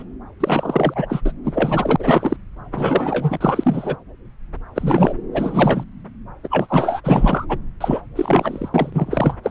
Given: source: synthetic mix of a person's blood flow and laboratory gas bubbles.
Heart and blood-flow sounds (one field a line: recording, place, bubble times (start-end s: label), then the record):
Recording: Doppler ultrasound of blood flow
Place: subclavian vein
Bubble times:
0.00-0.04 s: bubbles
0.40-1.06 s: bubbles
1.09-1.21 s: bubbles
1.25-1.32 s: bubbles
1.44-1.96 s: bubbles
1.99-2.37 s: bubbles
2.72-3.37 s: bubbles
3.41-3.97 s: bubbles
4.75-5.14 s: bubbles
5.33-5.84 s: bubbles
6.43-7.00 s: bubbles
7.04-7.46 s: bubbles
7.48-7.58 s: bubbles
7.80-8.01 s: bubbles
8.16-8.69 s: bubbles
8.74-9.34 s: bubbles
9.43-9.51 s: bubbles
From the record:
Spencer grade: 3 (all of the cardiac periods contain showers or single bubble signals, but not dominating or overriding the cardiac motion signals)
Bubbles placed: anywhere in the cardiac cycle